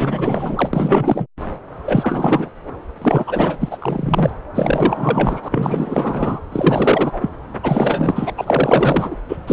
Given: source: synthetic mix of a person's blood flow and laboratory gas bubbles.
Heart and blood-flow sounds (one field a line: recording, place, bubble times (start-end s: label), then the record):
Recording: Doppler ultrasound of blood flow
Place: subclavian vein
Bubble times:
0.00-0.69 s: bubbles
0.73-1.26 s: bubbles
1.81-2.50 s: bubbles
3.02-3.77 s: bubbles
3.80-4.30 s: bubbles
4.54-6.40 s: bubbles
6.52-7.29 s: bubbles
7.63-8.33 s: bubbles
8.37-9.16 s: bubbles
9.28-9.37 s: bubbles
9.47-9.53 s: bubbles
From the record:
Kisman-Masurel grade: 444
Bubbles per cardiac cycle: continuous sound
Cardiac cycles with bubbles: 100%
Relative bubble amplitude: maximal (0.775 to 0.999)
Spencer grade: 4 (maximum detectable bubble signal sounding continuously throughout systole and diastole of every cardiac period, and overriding the amplitude of the normal cardiac signals)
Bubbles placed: anywhere in the cardiac cycle